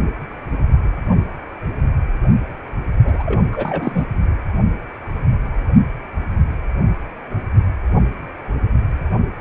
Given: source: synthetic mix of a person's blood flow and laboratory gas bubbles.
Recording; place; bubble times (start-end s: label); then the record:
Doppler ultrasound of blood flow; precordium
3.04-3.42 s: bubbles
3.52-4.06 s: bubbles
From the record:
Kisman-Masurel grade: 212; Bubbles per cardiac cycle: several, 3 to 8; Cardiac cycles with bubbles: 1 to 10%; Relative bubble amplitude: moderate (0.250 to 0.450); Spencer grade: 1 (occasional bubble signal discernible with the cardiac motion signal, with majority of cardiac periods free of bubbles); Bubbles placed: only in the low amplitude regions of the cardiac cycle